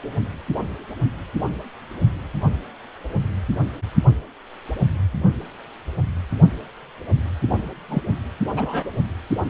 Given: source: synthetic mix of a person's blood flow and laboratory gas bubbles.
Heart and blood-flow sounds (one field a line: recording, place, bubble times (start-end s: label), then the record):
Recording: Doppler ultrasound of blood flow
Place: precordium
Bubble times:
7.90-8.01 s: bubbles
8.56-8.84 s: bubbles
From the record:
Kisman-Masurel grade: 113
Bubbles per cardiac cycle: 1 to 2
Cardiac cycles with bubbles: 1 to 10%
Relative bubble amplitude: loud (0.450 to 0.775)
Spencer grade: 1 (occasional bubble signal discernible with the cardiac motion signal, with majority of cardiac periods free of bubbles)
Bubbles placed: only in the low amplitude regions of the cardiac cycle